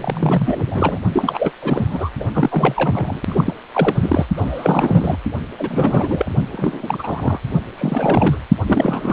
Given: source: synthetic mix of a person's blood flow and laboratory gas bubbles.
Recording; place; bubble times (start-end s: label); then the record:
Doppler ultrasound of blood flow; precordium
0.01-0.99 s: bubbles
1.12-1.51 s: bubbles
1.61-2.10 s: bubbles
2.19-2.24 s: bubbles
2.34-3.21 s: bubbles
3.28-3.54 s: bubbles
3.73-4.26 s: bubbles
4.36-5.16 s: bubbles
5.58-6.31 s: bubbles
6.52-7.38 s: bubbles
7.76-8.38 s: bubbles
8.66-9.13 s: bubbles
From the record:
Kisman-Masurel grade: 332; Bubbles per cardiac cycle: rolling drumbeat, 9 or more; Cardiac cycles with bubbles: 50 to 99%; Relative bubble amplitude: moderate (0.250 to 0.450); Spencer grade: 3 (all of the cardiac periods contain showers or single bubble signals, but not dominating or overriding the cardiac motion signals); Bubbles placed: only in the low amplitude regions of the cardiac cycle